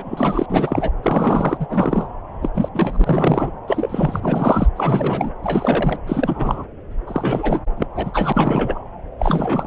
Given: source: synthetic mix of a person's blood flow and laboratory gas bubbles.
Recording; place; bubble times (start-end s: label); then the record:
Doppler ultrasound of blood flow; subclavian vein
0.00-0.46 s: bubbles
0.50-0.91 s: bubbles
1.02-1.57 s: bubbles
1.59-1.67 s: bubbles
1.69-2.06 s: bubbles
2.42-2.49 s: bubbles
2.54-2.69 s: bubbles
2.75-3.52 s: bubbles
3.67-4.67 s: bubbles
4.76-5.33 s: bubbles
5.43-5.99 s: bubbles
6.07-6.64 s: bubbles
7.07-7.61 s: bubbles
7.76-7.87 s: bubbles
7.96-8.80 s: bubbles
9.19-9.67 s: bubbles
From the record:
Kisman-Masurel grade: 343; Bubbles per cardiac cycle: rolling drumbeat, 9 or more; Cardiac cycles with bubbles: 100%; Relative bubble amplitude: loud (0.450 to 0.775); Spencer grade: 3 (all of the cardiac periods contain showers or single bubble signals, but not dominating or overriding the cardiac motion signals); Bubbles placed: anywhere in the cardiac cycle